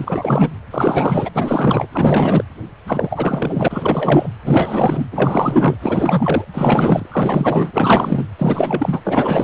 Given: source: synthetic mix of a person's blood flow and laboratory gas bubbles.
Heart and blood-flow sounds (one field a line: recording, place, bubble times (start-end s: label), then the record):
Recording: Doppler ultrasound of blood flow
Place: precordium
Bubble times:
0.00-0.52 s: bubbles
0.70-1.30 s: bubbles
1.34-1.88 s: bubbles
1.92-2.44 s: bubbles
2.86-4.29 s: bubbles
4.45-5.07 s: bubbles
5.12-5.76 s: bubbles
5.82-6.45 s: bubbles
6.54-7.06 s: bubbles
7.12-8.24 s: bubbles
8.38-9.00 s: bubbles
9.04-9.44 s: bubbles
From the record:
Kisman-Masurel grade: 444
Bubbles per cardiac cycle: continuous sound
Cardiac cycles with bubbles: 100%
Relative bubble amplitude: maximal (0.775 to 0.999)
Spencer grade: 4 (maximum detectable bubble signal sounding continuously throughout systole and diastole of every cardiac period, and overriding the amplitude of the normal cardiac signals)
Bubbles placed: anywhere in the cardiac cycle